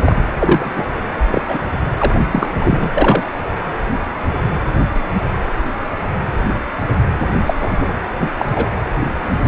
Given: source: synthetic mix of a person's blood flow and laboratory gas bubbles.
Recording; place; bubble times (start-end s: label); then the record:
Doppler ultrasound of blood flow; precordium
0.05-0.16 s: bubbles
0.39-0.90 s: bubbles
1.31-1.42 s: bubbles
1.48-1.60 s: bubbles
1.98-2.16 s: bubbles
2.31-2.52 s: bubbles
2.58-2.90 s: bubbles
2.94-3.24 s: bubbles
7.46-7.54 s: bubbles
7.60-7.92 s: bubbles
8.21-8.30 s: bubbles
8.38-8.69 s: bubbles
From the record:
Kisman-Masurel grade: 233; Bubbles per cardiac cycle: several, 3 to 8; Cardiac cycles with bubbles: 50 to 99%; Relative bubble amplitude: loud (0.450 to 0.775); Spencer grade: 3 (all of the cardiac periods contain showers or single bubble signals, but not dominating or overriding the cardiac motion signals); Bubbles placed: anywhere in the cardiac cycle